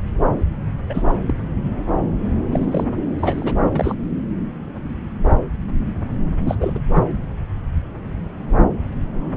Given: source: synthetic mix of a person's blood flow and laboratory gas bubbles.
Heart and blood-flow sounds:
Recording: Doppler ultrasound of blood flow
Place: subclavian vein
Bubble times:
0.89-1.03 s: bubbles
1.08-1.17 s: bubbles
1.27-1.34 s: bubbles
2.51-2.84 s: bubbles
3.19-3.57 s: bubbles
3.75-3.95 s: bubbles
6.45-6.55 s: bubbles
6.60-6.79 s: bubbles
6.95-7.01 s: bubbles
From the record:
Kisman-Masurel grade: 222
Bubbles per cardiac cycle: several, 3 to 8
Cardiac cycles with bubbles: 10 to 50%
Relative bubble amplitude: moderate (0.250 to 0.450)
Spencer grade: 2 (many but less than half of the cardiac periods contain bubble signals, singularly or in groups)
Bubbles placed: anywhere in the cardiac cycle

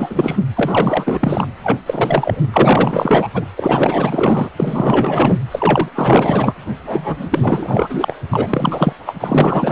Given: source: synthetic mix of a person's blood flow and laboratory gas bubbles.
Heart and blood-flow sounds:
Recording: Doppler ultrasound of blood flow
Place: precordium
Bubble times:
0.00-0.36 s: bubbles
0.56-1.48 s: bubbles
1.64-1.79 s: bubbles
1.86-2.44 s: bubbles
2.52-3.31 s: bubbles
3.33-3.46 s: bubbles
3.58-4.49 s: bubbles
4.57-5.37 s: bubbles
5.51-5.89 s: bubbles
5.95-6.54 s: bubbles
6.86-8.16 s: bubbles
8.30-8.93 s: bubbles
9.06-9.13 s: bubbles
9.20-9.72 s: bubbles
From the record:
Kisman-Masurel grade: 444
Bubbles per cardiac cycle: continuous sound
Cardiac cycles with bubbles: 100%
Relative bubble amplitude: maximal (0.775 to 0.999)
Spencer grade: 4 (maximum detectable bubble signal sounding continuously throughout systole and diastole of every cardiac period, and overriding the amplitude of the normal cardiac signals)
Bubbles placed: anywhere in the cardiac cycle

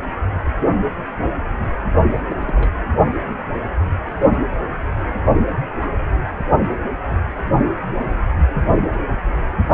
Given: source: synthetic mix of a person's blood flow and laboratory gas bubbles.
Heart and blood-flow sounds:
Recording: Doppler ultrasound of blood flow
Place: precordium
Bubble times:
2.15-2.20 s: bubbles
2.27-2.71 s: bubbles
From the record:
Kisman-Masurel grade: 211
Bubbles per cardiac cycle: several, 3 to 8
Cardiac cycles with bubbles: 1 to 10%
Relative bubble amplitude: barely perceptible (0.100 to 0.250)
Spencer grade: 1 (occasional bubble signal discernible with the cardiac motion signal, with majority of cardiac periods free of bubbles)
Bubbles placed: only in the low amplitude regions of the cardiac cycle

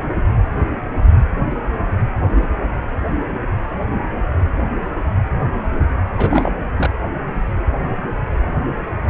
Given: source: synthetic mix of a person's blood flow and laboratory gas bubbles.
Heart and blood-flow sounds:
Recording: Doppler ultrasound of blood flow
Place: precordium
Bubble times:
6.18-6.52 s: bubbles
6.77-6.91 s: bubbles
From the record:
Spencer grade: 1 (occasional bubble signal discernible with the cardiac motion signal, with majority of cardiac periods free of bubbles)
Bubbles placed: anywhere in the cardiac cycle

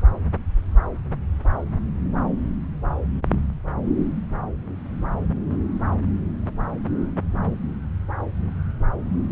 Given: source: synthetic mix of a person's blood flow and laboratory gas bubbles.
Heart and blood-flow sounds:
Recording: Doppler ultrasound of blood flow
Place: subclavian vein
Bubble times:
no bubbles
From the record:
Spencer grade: 0 (complete lack of bubble signals)

